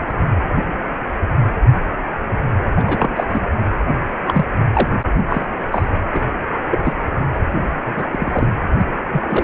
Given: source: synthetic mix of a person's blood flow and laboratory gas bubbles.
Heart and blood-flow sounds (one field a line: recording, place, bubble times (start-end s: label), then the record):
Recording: Doppler ultrasound of blood flow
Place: precordium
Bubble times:
0.08-0.13 s: bubbles
2.75-3.26 s: bubbles
3.29-3.42 s: bubbles
4.26-4.46 s: bubbles
4.73-4.88 s: bubbles
5.29-5.46 s: bubbles
5.71-5.88 s: bubbles
6.12-6.27 s: bubbles
6.71-6.79 s: bubbles
6.84-6.93 s: bubbles
7.34-7.39 s: bubbles
7.86-8.04 s: bubbles
8.12-8.50 s: bubbles
8.78-8.86 s: bubbles
9.12-9.21 s: bubbles
9.29-9.44 s: bubbles
From the record:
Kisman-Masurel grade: 232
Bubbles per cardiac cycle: several, 3 to 8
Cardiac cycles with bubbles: 50 to 99%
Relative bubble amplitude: moderate (0.250 to 0.450)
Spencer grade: 3 (all of the cardiac periods contain showers or single bubble signals, but not dominating or overriding the cardiac motion signals)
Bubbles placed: anywhere in the cardiac cycle